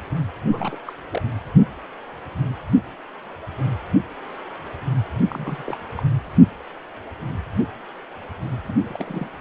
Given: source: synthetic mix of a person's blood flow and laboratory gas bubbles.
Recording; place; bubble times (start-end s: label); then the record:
Doppler ultrasound of blood flow; precordium
0.52-0.79 s: bubbles
0.86-0.93 s: bubbles
1.10-1.22 s: bubbles
5.29-5.62 s: bubbles
5.66-5.77 s: bubbles
5.97-6.03 s: bubbles
8.64-9.29 s: bubbles
From the record:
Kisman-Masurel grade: 221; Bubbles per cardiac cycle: several, 3 to 8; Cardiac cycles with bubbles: 10 to 50%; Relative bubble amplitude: barely perceptible (0.100 to 0.250); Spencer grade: 2 (many but less than half of the cardiac periods contain bubble signals, singularly or in groups); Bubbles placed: only in the low amplitude regions of the cardiac cycle